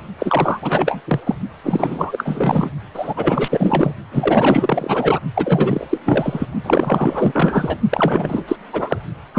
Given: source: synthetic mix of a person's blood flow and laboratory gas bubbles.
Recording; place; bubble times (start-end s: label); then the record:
Doppler ultrasound of blood flow; precordium
0.19-1.02 s: bubbles
1.05-1.20 s: bubbles
1.26-1.35 s: bubbles
1.64-2.71 s: bubbles
2.94-3.14 s: bubbles
3.17-3.94 s: bubbles
4.11-5.20 s: bubbles
5.35-5.87 s: bubbles
5.89-5.98 s: bubbles
6.05-6.46 s: bubbles
6.63-7.77 s: bubbles
7.91-8.45 s: bubbles
8.47-8.56 s: bubbles
8.72-8.97 s: bubbles
9.34-9.39 s: bubbles
From the record:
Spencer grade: 4 (maximum detectable bubble signal sounding continuously throughout systole and diastole of every cardiac period, and overriding the amplitude of the normal cardiac signals); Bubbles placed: only in the low amplitude regions of the cardiac cycle